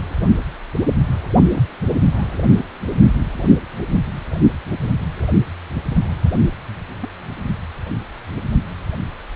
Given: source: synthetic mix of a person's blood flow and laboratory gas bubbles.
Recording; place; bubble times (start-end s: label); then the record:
Doppler ultrasound of blood flow; precordium
1.53-1.62 s: bubbles
2.13-2.24 s: bubbles
7.00-7.09 s: bubbles
From the record:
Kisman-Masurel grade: 121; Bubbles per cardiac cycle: 1 to 2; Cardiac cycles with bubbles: 10 to 50%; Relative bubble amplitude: barely perceptible (0.100 to 0.250); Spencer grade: 2 (many but less than half of the cardiac periods contain bubble signals, singularly or in groups); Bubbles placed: anywhere in the cardiac cycle